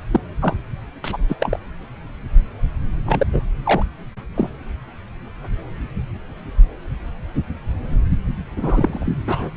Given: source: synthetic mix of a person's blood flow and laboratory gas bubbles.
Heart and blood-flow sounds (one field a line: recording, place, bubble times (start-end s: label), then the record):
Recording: Doppler ultrasound of blood flow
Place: subclavian vein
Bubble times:
0.11-0.20 s: bubbles
0.40-0.56 s: bubbles
1.04-1.17 s: bubbles
1.28-1.36 s: bubbles
1.40-1.59 s: bubbles
3.06-3.27 s: bubbles
3.33-3.41 s: bubbles
3.64-3.83 s: bubbles
4.36-4.49 s: bubbles
8.55-9.16 s: bubbles
9.27-9.49 s: bubbles
From the record:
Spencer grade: 2 (many but less than half of the cardiac periods contain bubble signals, singularly or in groups)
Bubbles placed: anywhere in the cardiac cycle